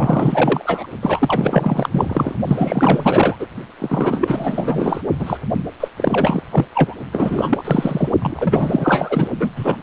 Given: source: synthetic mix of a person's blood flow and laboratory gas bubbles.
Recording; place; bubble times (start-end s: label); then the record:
Doppler ultrasound of blood flow; precordium
0.00-0.86 s: bubbles
1.02-2.35 s: bubbles
2.47-3.36 s: bubbles
3.38-3.47 s: bubbles
3.79-5.01 s: bubbles
5.18-5.38 s: bubbles
5.54-5.60 s: bubbles
5.80-5.88 s: bubbles
5.97-6.42 s: bubbles
6.51-6.66 s: bubbles
6.74-6.95 s: bubbles
7.12-8.09 s: bubbles
8.21-9.28 s: bubbles
9.39-9.50 s: bubbles
9.56-9.76 s: bubbles
From the record:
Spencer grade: 4 (maximum detectable bubble signal sounding continuously throughout systole and diastole of every cardiac period, and overriding the amplitude of the normal cardiac signals); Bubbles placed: only in the low amplitude regions of the cardiac cycle